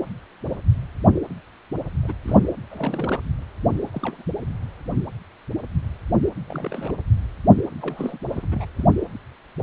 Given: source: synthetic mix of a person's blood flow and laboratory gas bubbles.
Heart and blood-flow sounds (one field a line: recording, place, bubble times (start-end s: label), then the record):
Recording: Doppler ultrasound of blood flow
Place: precordium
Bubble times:
2.03-2.12 s: bubbles
2.25-2.46 s: bubbles
2.71-3.20 s: bubbles
3.94-4.23 s: bubbles
6.47-6.95 s: bubbles
7.81-8.18 s: bubbles
8.30-8.45 s: bubbles
8.51-8.65 s: bubbles
8.76-8.87 s: bubbles
From the record:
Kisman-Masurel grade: 221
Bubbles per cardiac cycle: several, 3 to 8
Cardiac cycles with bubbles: 10 to 50%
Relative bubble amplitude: barely perceptible (0.100 to 0.250)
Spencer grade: 2 (many but less than half of the cardiac periods contain bubble signals, singularly or in groups)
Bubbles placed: anywhere in the cardiac cycle